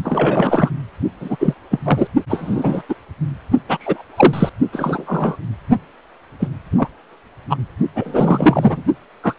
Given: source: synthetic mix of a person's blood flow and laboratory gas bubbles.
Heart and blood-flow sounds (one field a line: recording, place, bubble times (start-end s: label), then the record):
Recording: Doppler ultrasound of blood flow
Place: precordium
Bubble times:
0.04-0.70 s: bubbles
1.20-1.36 s: bubbles
1.40-1.54 s: bubbles
1.71-1.79 s: bubbles
1.85-2.07 s: bubbles
2.29-2.83 s: bubbles
2.89-2.94 s: bubbles
3.69-3.78 s: bubbles
3.80-4.03 s: bubbles
4.16-4.50 s: bubbles
4.72-5.36 s: bubbles
6.40-6.48 s: bubbles
6.78-6.88 s: bubbles
7.50-7.57 s: bubbles
7.95-8.84 s: bubbles
9.23-9.34 s: bubbles
From the record:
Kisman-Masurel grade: 243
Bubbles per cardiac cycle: several, 3 to 8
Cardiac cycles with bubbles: 100%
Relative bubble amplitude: loud (0.450 to 0.775)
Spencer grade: 3 (all of the cardiac periods contain showers or single bubble signals, but not dominating or overriding the cardiac motion signals)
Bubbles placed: only in the low amplitude regions of the cardiac cycle